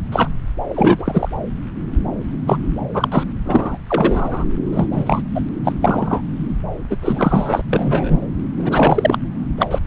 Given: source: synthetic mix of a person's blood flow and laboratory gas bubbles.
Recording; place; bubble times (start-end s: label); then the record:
Doppler ultrasound of blood flow; subclavian vein
0.12-0.28 s: bubbles
0.69-1.28 s: bubbles
2.46-2.57 s: bubbles
2.93-3.08 s: bubbles
3.11-3.23 s: bubbles
3.45-3.77 s: bubbles
3.87-4.45 s: bubbles
4.71-4.87 s: bubbles
4.92-5.22 s: bubbles
5.35-5.41 s: bubbles
5.64-5.72 s: bubbles
5.81-6.21 s: bubbles
6.90-6.96 s: bubbles
7.01-7.62 s: bubbles
7.71-8.20 s: bubbles
8.58-9.19 s: bubbles
9.58-9.66 s: bubbles
9.71-9.79 s: bubbles
From the record:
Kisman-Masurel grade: 233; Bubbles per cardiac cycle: several, 3 to 8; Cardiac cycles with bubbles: 50 to 99%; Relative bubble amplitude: loud (0.450 to 0.775); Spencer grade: 3 (all of the cardiac periods contain showers or single bubble signals, but not dominating or overriding the cardiac motion signals); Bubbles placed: anywhere in the cardiac cycle